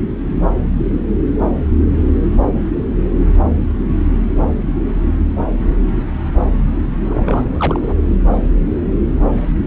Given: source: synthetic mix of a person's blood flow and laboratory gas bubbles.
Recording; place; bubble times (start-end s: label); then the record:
Doppler ultrasound of blood flow; subclavian vein
7.09-7.93 s: bubbles
From the record:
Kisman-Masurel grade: 212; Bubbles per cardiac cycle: several, 3 to 8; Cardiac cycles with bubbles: 1 to 10%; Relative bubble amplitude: moderate (0.250 to 0.450); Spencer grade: 1 (occasional bubble signal discernible with the cardiac motion signal, with majority of cardiac periods free of bubbles); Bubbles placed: anywhere in the cardiac cycle